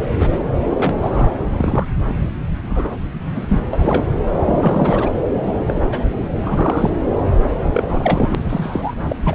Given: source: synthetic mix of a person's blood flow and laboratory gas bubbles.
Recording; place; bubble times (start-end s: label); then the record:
Doppler ultrasound of blood flow; subclavian vein
0.00-0.40 s: bubbles
0.69-0.96 s: bubbles
1.02-1.30 s: bubbles
1.52-1.86 s: bubbles
1.98-2.30 s: bubbles
2.69-2.96 s: bubbles
3.35-3.59 s: bubbles
3.73-4.04 s: bubbles
4.45-5.09 s: bubbles
5.66-5.74 s: bubbles
5.89-6.05 s: bubbles
6.42-6.90 s: bubbles
7.73-8.35 s: bubbles
8.49-8.94 s: bubbles
9.09-9.16 s: bubbles
9.23-9.35 s: bubbles
From the record:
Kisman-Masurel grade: 242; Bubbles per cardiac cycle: several, 3 to 8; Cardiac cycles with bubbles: 100%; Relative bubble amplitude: moderate (0.250 to 0.450); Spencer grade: 3 (all of the cardiac periods contain showers or single bubble signals, but not dominating or overriding the cardiac motion signals); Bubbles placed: anywhere in the cardiac cycle